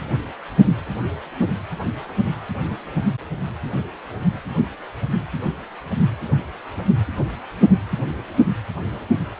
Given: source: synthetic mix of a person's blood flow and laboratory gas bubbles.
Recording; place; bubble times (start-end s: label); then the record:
Doppler ultrasound of blood flow; precordium
0.01-0.18 s: bubbles
From the record:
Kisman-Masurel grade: 111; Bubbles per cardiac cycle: 1 to 2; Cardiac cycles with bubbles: 1 to 10%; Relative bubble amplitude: barely perceptible (0.100 to 0.250); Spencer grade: 1 (occasional bubble signal discernible with the cardiac motion signal, with majority of cardiac periods free of bubbles); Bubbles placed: anywhere in the cardiac cycle